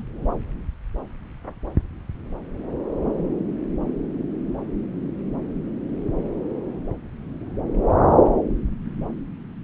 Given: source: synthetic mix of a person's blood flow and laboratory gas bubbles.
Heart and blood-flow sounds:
Doppler ultrasound of blood flow; subclavian vein
0.00-0.02 s: bubbles
From the record:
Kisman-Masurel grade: 211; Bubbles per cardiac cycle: several, 3 to 8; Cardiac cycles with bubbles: 1 to 10%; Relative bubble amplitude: barely perceptible (0.100 to 0.250); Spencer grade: 1 (occasional bubble signal discernible with the cardiac motion signal, with majority of cardiac periods free of bubbles); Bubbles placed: anywhere in the cardiac cycle

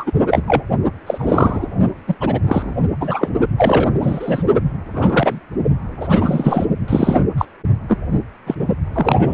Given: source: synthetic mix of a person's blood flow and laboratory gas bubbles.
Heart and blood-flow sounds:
Doppler ultrasound of blood flow; precordium
0.00-0.11 s: bubbles
0.31-0.41 s: bubbles
0.47-0.62 s: bubbles
1.06-1.68 s: bubbles
2.08-2.16 s: bubbles
2.20-2.40 s: bubbles
2.46-2.74 s: bubbles
3.00-3.29 s: bubbles
3.58-3.90 s: bubbles
4.01-4.43 s: bubbles
4.92-5.40 s: bubbles
6.00-6.67 s: bubbles
6.88-7.24 s: bubbles
7.38-7.45 s: bubbles
7.88-7.97 s: bubbles
8.46-8.55 s: bubbles
8.60-8.65 s: bubbles
8.93-9.34 s: bubbles
From the record:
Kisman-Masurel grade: 243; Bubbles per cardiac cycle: several, 3 to 8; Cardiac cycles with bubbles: 100%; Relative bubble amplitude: loud (0.450 to 0.775); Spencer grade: 3 (all of the cardiac periods contain showers or single bubble signals, but not dominating or overriding the cardiac motion signals); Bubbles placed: only in the low amplitude regions of the cardiac cycle

